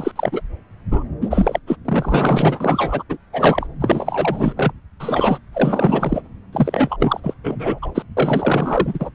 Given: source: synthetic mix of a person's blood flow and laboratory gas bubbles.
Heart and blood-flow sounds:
Doppler ultrasound of blood flow; subclavian vein
0.00-0.12 s: bubbles
0.16-0.41 s: bubbles
0.90-1.04 s: bubbles
1.21-1.59 s: bubbles
1.67-1.76 s: bubbles
1.85-3.02 s: bubbles
3.09-3.17 s: bubbles
3.32-3.67 s: bubbles
3.80-4.73 s: bubbles
4.99-5.38 s: bubbles
5.52-6.22 s: bubbles
6.52-6.97 s: bubbles
6.99-7.21 s: bubbles
7.23-7.34 s: bubbles
7.43-7.79 s: bubbles
7.82-7.91 s: bubbles
7.95-8.03 s: bubbles
8.16-9.11 s: bubbles
From the record:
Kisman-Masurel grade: 444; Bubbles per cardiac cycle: continuous sound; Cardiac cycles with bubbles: 100%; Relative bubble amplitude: maximal (0.775 to 0.999); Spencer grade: 4 (maximum detectable bubble signal sounding continuously throughout systole and diastole of every cardiac period, and overriding the amplitude of the normal cardiac signals); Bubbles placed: anywhere in the cardiac cycle

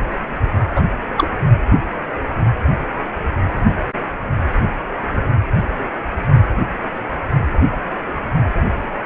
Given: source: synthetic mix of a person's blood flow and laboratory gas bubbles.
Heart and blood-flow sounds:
Doppler ultrasound of blood flow; precordium
0.74-0.87 s: bubbles
1.17-1.26 s: bubbles
From the record:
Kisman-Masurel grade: 213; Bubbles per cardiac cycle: several, 3 to 8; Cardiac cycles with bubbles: 1 to 10%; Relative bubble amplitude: loud (0.450 to 0.775); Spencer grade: 1 (occasional bubble signal discernible with the cardiac motion signal, with majority of cardiac periods free of bubbles); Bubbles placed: anywhere in the cardiac cycle

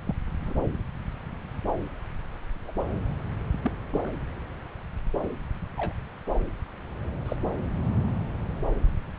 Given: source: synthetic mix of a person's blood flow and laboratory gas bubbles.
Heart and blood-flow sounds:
Doppler ultrasound of blood flow; subclavian vein
0.06-0.13 s: bubbles
0.42-0.54 s: bubbles
2.67-2.71 s: bubbles
3.63-3.72 s: bubbles
3.90-4.12 s: bubbles
5.23-5.27 s: bubbles
5.78-5.93 s: bubbles
7.25-7.37 s: bubbles
From the record:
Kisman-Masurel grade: 121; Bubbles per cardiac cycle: 1 to 2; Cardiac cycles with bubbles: 10 to 50%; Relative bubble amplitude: barely perceptible (0.100 to 0.250); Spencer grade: 2 (many but less than half of the cardiac periods contain bubble signals, singularly or in groups); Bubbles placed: anywhere in the cardiac cycle

